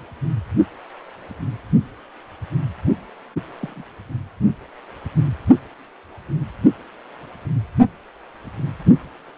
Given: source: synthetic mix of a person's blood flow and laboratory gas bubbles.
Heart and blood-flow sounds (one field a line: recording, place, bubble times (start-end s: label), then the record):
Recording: Doppler ultrasound of blood flow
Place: precordium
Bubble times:
3.60-3.84 s: bubbles
From the record:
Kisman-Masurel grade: 111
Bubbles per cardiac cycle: 1 to 2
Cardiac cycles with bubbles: 1 to 10%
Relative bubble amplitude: barely perceptible (0.100 to 0.250)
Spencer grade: 1 (occasional bubble signal discernible with the cardiac motion signal, with majority of cardiac periods free of bubbles)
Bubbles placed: only in the low amplitude regions of the cardiac cycle